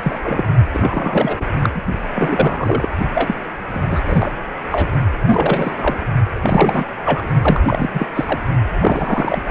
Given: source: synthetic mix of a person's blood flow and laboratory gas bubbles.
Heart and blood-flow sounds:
Doppler ultrasound of blood flow; precordium
0.00-0.19 s: bubbles
0.23-0.45 s: bubbles
0.73-1.36 s: bubbles
1.40-1.45 s: bubbles
1.56-1.82 s: bubbles
2.15-2.88 s: bubbles
3.15-3.34 s: bubbles
3.72-4.32 s: bubbles
4.71-4.91 s: bubbles
5.25-6.04 s: bubbles
6.42-6.84 s: bubbles
7.04-7.28 s: bubbles
7.42-7.60 s: bubbles
7.65-7.90 s: bubbles
7.93-8.06 s: bubbles
8.15-8.39 s: bubbles
8.79-9.42 s: bubbles
From the record:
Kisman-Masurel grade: 343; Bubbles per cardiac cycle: rolling drumbeat, 9 or more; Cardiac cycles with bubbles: 100%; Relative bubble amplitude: loud (0.450 to 0.775); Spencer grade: 3 (all of the cardiac periods contain showers or single bubble signals, but not dominating or overriding the cardiac motion signals); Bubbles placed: only in the low amplitude regions of the cardiac cycle

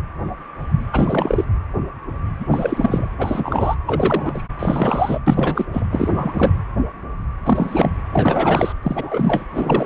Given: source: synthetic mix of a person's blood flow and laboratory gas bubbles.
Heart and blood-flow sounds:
Doppler ultrasound of blood flow; precordium
0.93-1.44 s: bubbles
2.39-2.45 s: bubbles
2.51-3.09 s: bubbles
3.19-3.76 s: bubbles
3.85-4.42 s: bubbles
4.59-5.19 s: bubbles
5.26-5.65 s: bubbles
5.73-5.86 s: bubbles
5.92-6.51 s: bubbles
7.44-7.92 s: bubbles
8.12-8.72 s: bubbles
8.82-9.45 s: bubbles
9.54-9.86 s: bubbles
From the record:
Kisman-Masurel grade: 333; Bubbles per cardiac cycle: rolling drumbeat, 9 or more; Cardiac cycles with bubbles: 50 to 99%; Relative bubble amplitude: loud (0.450 to 0.775); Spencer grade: 3 (all of the cardiac periods contain showers or single bubble signals, but not dominating or overriding the cardiac motion signals); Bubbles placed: anywhere in the cardiac cycle

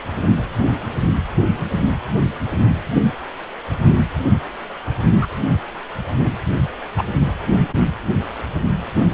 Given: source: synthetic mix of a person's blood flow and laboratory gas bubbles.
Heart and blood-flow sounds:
Doppler ultrasound of blood flow; precordium
5.22-5.28 s: bubbles
6.97-7.04 s: bubbles
From the record:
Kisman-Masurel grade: 123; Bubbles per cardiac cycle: 1 to 2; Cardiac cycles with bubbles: 10 to 50%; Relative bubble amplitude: loud (0.450 to 0.775); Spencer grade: 2 (many but less than half of the cardiac periods contain bubble signals, singularly or in groups); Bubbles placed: only in the low amplitude regions of the cardiac cycle

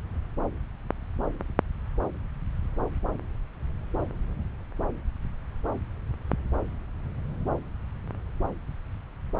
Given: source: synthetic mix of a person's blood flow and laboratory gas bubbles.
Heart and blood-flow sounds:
Doppler ultrasound of blood flow; subclavian vein
no bubbles
From the record:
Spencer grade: 0 (complete lack of bubble signals)

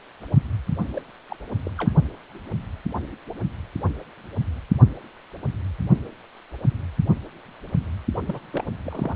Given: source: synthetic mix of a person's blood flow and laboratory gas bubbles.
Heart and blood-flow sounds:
Doppler ultrasound of blood flow; precordium
0.94-1.01 s: bubbles
1.29-1.36 s: bubbles
1.64-1.71 s: bubbles
1.77-1.91 s: bubbles
8.28-8.39 s: bubbles
8.41-8.44 s: bubbles
8.50-8.64 s: bubbles
8.83-9.16 s: bubbles
From the record:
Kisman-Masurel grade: 221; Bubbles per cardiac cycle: several, 3 to 8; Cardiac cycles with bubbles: 10 to 50%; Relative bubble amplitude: barely perceptible (0.100 to 0.250); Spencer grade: 2 (many but less than half of the cardiac periods contain bubble signals, singularly or in groups); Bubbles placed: only in the low amplitude regions of the cardiac cycle

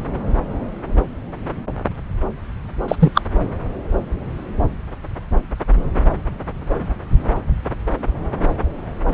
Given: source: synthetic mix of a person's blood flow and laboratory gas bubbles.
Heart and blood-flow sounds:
Doppler ultrasound of blood flow; subclavian vein
2.88-2.96 s: bubbles
2.99-3.12 s: bubbles
3.15-3.21 s: bubbles
From the record:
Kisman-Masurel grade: 223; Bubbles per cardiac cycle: several, 3 to 8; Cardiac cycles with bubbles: 10 to 50%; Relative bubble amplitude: loud (0.450 to 0.775); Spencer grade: 2 (many but less than half of the cardiac periods contain bubble signals, singularly or in groups); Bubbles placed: anywhere in the cardiac cycle

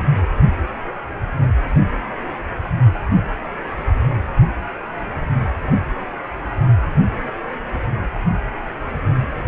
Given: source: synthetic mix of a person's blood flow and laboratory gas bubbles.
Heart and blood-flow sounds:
Doppler ultrasound of blood flow; precordium
no bubbles
From the record:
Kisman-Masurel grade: 000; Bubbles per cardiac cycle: 0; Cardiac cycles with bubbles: 0%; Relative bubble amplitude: no bubbles discernible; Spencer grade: 0 (complete lack of bubble signals)

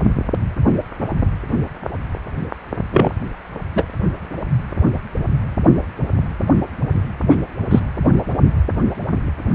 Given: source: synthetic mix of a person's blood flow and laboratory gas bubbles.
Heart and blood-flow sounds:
Doppler ultrasound of blood flow; precordium
2.92-3.10 s: bubbles
3.75-3.83 s: bubbles
7.28-7.36 s: bubbles
7.70-7.80 s: bubbles
From the record:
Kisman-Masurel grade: 123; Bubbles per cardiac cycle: 1 to 2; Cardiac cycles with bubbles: 10 to 50%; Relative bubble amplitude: loud (0.450 to 0.775); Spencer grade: 2 (many but less than half of the cardiac periods contain bubble signals, singularly or in groups); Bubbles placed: only in the low amplitude regions of the cardiac cycle

